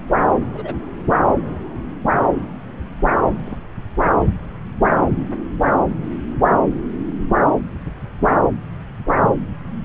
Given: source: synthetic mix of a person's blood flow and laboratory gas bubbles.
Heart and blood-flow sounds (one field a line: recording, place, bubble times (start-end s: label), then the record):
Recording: Doppler ultrasound of blood flow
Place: subclavian vein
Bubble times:
0.53-0.74 s: bubbles
3.45-3.58 s: bubbles
From the record:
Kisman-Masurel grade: 121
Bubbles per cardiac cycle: 1 to 2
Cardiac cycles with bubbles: 10 to 50%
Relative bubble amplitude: barely perceptible (0.100 to 0.250)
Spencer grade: 2 (many but less than half of the cardiac periods contain bubble signals, singularly or in groups)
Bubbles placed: anywhere in the cardiac cycle